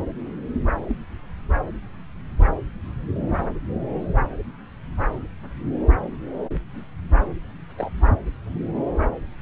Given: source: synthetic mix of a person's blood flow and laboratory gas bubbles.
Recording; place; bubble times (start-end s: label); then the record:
Doppler ultrasound of blood flow; subclavian vein
0.83-0.97 s: bubbles
7.77-7.89 s: bubbles
From the record:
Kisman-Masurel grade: 121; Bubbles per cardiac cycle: 1 to 2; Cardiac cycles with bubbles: 10 to 50%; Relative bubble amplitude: barely perceptible (0.100 to 0.250); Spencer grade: 2 (many but less than half of the cardiac periods contain bubble signals, singularly or in groups); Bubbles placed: anywhere in the cardiac cycle